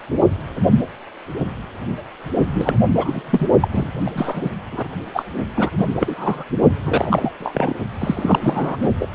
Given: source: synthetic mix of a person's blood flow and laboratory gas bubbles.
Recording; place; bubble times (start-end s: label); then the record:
Doppler ultrasound of blood flow; precordium
2.46-2.75 s: bubbles
2.93-3.47 s: bubbles
3.60-3.68 s: bubbles
3.72-3.89 s: bubbles
4.05-4.50 s: bubbles
4.71-4.88 s: bubbles
5.13-5.23 s: bubbles
5.56-5.71 s: bubbles
5.78-5.88 s: bubbles
5.99-6.44 s: bubbles
6.86-7.31 s: bubbles
7.40-7.73 s: bubbles
8.00-8.77 s: bubbles
8.81-8.89 s: bubbles
8.99-9.07 s: bubbles
From the record:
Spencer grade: 3 (all of the cardiac periods contain showers or single bubble signals, but not dominating or overriding the cardiac motion signals); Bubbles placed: only in the low amplitude regions of the cardiac cycle